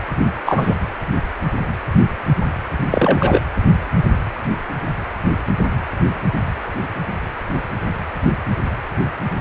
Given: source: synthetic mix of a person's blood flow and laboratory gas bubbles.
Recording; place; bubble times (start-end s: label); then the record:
Doppler ultrasound of blood flow; precordium
0.46-0.75 s: bubbles
2.91-3.40 s: bubbles
From the record:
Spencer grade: 2 (many but less than half of the cardiac periods contain bubble signals, singularly or in groups); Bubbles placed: anywhere in the cardiac cycle